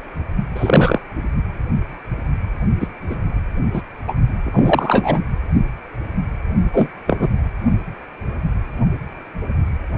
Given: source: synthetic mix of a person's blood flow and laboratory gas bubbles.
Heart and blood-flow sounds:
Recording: Doppler ultrasound of blood flow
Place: precordium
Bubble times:
0.55-1.00 s: bubbles
2.80-2.87 s: bubbles
3.10-3.15 s: bubbles
3.73-3.82 s: bubbles
4.08-4.14 s: bubbles
4.45-5.23 s: bubbles
6.73-6.89 s: bubbles
7.07-7.28 s: bubbles
From the record:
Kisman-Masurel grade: 223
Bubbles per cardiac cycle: several, 3 to 8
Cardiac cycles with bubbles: 10 to 50%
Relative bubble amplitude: loud (0.450 to 0.775)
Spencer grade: 2 (many but less than half of the cardiac periods contain bubble signals, singularly or in groups)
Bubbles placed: only in the low amplitude regions of the cardiac cycle

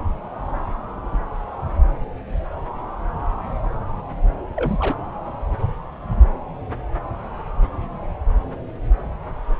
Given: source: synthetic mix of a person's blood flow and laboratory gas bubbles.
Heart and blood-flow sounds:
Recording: Doppler ultrasound of blood flow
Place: subclavian vein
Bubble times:
4.56-4.96 s: bubbles
From the record:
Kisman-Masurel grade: 222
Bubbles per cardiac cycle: several, 3 to 8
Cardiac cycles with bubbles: 10 to 50%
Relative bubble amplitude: moderate (0.250 to 0.450)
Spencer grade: 2 (many but less than half of the cardiac periods contain bubble signals, singularly or in groups)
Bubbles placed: anywhere in the cardiac cycle

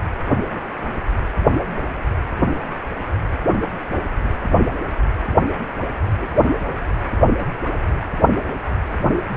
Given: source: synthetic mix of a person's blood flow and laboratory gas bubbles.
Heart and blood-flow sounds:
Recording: Doppler ultrasound of blood flow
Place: precordium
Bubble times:
6.20-6.27 s: bubbles
From the record:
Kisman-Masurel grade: 121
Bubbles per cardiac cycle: 1 to 2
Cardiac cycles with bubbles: 10 to 50%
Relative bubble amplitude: barely perceptible (0.100 to 0.250)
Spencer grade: 2 (many but less than half of the cardiac periods contain bubble signals, singularly or in groups)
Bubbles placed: anywhere in the cardiac cycle

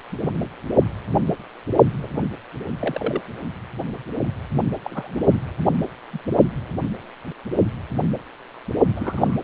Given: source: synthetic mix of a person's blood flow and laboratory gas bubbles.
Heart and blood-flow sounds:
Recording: Doppler ultrasound of blood flow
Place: precordium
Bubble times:
2.00-2.23 s: bubbles
2.79-3.21 s: bubbles
4.83-5.21 s: bubbles
6.12-6.18 s: bubbles
8.96-9.37 s: bubbles
From the record:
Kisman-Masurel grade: 221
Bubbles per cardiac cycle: several, 3 to 8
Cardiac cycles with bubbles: 10 to 50%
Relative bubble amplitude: barely perceptible (0.100 to 0.250)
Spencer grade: 2 (many but less than half of the cardiac periods contain bubble signals, singularly or in groups)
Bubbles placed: only in the low amplitude regions of the cardiac cycle

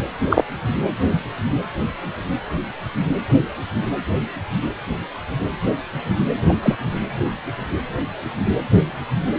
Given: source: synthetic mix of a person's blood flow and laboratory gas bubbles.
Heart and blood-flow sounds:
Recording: Doppler ultrasound of blood flow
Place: precordium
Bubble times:
0.30-0.44 s: bubbles
6.48-6.53 s: bubbles
6.62-6.75 s: bubbles
From the record:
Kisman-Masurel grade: 113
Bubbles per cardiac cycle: 1 to 2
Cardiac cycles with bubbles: 1 to 10%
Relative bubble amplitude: loud (0.450 to 0.775)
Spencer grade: 1 (occasional bubble signal discernible with the cardiac motion signal, with majority of cardiac periods free of bubbles)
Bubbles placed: anywhere in the cardiac cycle

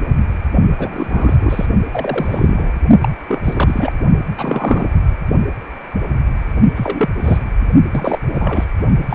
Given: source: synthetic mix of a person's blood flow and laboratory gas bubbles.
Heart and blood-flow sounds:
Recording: Doppler ultrasound of blood flow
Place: precordium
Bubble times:
0.78-1.36 s: bubbles
1.39-1.66 s: bubbles
1.91-2.75 s: bubbles
3.00-3.09 s: bubbles
3.28-3.42 s: bubbles
3.44-3.92 s: bubbles
4.38-4.92 s: bubbles
6.75-7.09 s: bubbles
7.15-7.44 s: bubbles
7.90-8.19 s: bubbles
8.30-8.65 s: bubbles
9.10-9.15 s: bubbles
From the record:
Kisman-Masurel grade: 232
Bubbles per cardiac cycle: several, 3 to 8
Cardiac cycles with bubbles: 50 to 99%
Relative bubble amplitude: moderate (0.250 to 0.450)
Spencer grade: 3 (all of the cardiac periods contain showers or single bubble signals, but not dominating or overriding the cardiac motion signals)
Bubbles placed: only in the low amplitude regions of the cardiac cycle

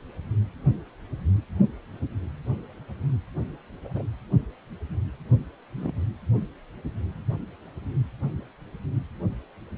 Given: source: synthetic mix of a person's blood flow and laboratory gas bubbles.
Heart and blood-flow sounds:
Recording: Doppler ultrasound of blood flow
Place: precordium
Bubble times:
3.84-4.04 s: bubbles
5.78-5.91 s: bubbles
From the record:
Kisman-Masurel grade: 121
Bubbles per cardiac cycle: 1 to 2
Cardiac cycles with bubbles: 10 to 50%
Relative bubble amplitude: barely perceptible (0.100 to 0.250)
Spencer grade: 2 (many but less than half of the cardiac periods contain bubble signals, singularly or in groups)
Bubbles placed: only in the low amplitude regions of the cardiac cycle

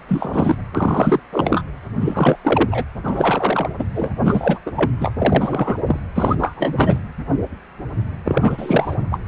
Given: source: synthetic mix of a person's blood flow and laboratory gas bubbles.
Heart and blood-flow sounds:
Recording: Doppler ultrasound of blood flow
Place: precordium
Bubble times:
0.08-0.55 s: bubbles
0.74-1.20 s: bubbles
1.32-1.62 s: bubbles
1.99-2.37 s: bubbles
2.42-2.84 s: bubbles
3.03-3.69 s: bubbles
3.78-3.84 s: bubbles
3.95-4.10 s: bubbles
4.24-4.59 s: bubbles
4.66-4.72 s: bubbles
4.76-4.92 s: bubbles
5.00-5.12 s: bubbles
5.18-5.79 s: bubbles
5.87-6.00 s: bubbles
6.15-6.35 s: bubbles
6.38-6.98 s: bubbles
8.25-8.96 s: bubbles
9.10-9.19 s: bubbles
From the record:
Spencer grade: 3 (all of the cardiac periods contain showers or single bubble signals, but not dominating or overriding the cardiac motion signals)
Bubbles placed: anywhere in the cardiac cycle

